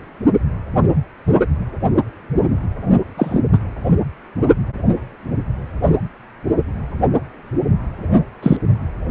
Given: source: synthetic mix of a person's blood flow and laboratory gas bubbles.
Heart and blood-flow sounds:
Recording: Doppler ultrasound of blood flow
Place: precordium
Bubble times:
3.17-3.41 s: bubbles
3.52-3.58 s: bubbles
8.43-8.57 s: bubbles
From the record:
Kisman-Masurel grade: 123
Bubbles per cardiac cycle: 1 to 2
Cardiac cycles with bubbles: 10 to 50%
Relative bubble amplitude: loud (0.450 to 0.775)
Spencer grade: 2 (many but less than half of the cardiac periods contain bubble signals, singularly or in groups)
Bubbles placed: anywhere in the cardiac cycle

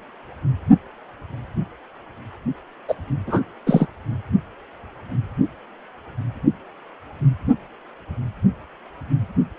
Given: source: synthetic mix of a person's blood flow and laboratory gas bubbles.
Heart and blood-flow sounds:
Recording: Doppler ultrasound of blood flow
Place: precordium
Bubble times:
2.88-2.94 s: bubbles
3.27-3.43 s: bubbles
3.67-3.86 s: bubbles
From the record:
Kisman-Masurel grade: 123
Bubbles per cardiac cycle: 1 to 2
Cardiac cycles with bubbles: 10 to 50%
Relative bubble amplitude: loud (0.450 to 0.775)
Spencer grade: 2 (many but less than half of the cardiac periods contain bubble signals, singularly or in groups)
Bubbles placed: anywhere in the cardiac cycle

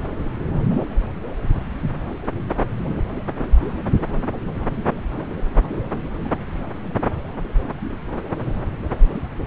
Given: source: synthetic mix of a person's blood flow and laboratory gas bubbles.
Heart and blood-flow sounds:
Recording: Doppler ultrasound of blood flow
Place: subclavian vein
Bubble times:
no bubbles
From the record:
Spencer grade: 0 (complete lack of bubble signals)

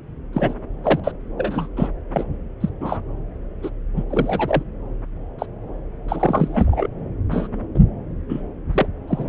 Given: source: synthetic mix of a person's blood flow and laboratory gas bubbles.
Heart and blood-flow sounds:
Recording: Doppler ultrasound of blood flow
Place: subclavian vein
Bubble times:
0.33-0.54 s: bubbles
0.84-1.00 s: bubbles
1.04-1.11 s: bubbles
1.37-1.67 s: bubbles
1.76-1.89 s: bubbles
2.12-2.23 s: bubbles
2.60-2.69 s: bubbles
2.80-3.00 s: bubbles
3.62-3.70 s: bubbles
3.95-4.03 s: bubbles
4.10-4.63 s: bubbles
5.39-5.46 s: bubbles
6.08-6.88 s: bubbles
7.31-7.48 s: bubbles
7.74-7.80 s: bubbles
8.29-8.42 s: bubbles
8.72-8.87 s: bubbles
9.07-9.29 s: bubbles
From the record:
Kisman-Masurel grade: 242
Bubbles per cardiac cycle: several, 3 to 8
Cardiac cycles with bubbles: 100%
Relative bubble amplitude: moderate (0.250 to 0.450)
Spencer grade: 3 (all of the cardiac periods contain showers or single bubble signals, but not dominating or overriding the cardiac motion signals)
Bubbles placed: anywhere in the cardiac cycle

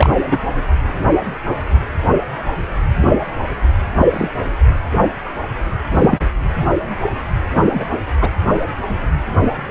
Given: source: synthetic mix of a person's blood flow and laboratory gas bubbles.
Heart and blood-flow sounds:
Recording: Doppler ultrasound of blood flow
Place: precordium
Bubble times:
0.00-0.10 s: bubbles
0.26-0.37 s: bubbles
3.96-4.07 s: bubbles
4.12-4.29 s: bubbles
5.88-6.20 s: bubbles
7.54-7.85 s: bubbles
8.21-8.29 s: bubbles
From the record:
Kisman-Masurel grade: 123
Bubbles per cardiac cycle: 1 to 2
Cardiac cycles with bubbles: 10 to 50%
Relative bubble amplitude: loud (0.450 to 0.775)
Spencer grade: 2 (many but less than half of the cardiac periods contain bubble signals, singularly or in groups)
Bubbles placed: anywhere in the cardiac cycle

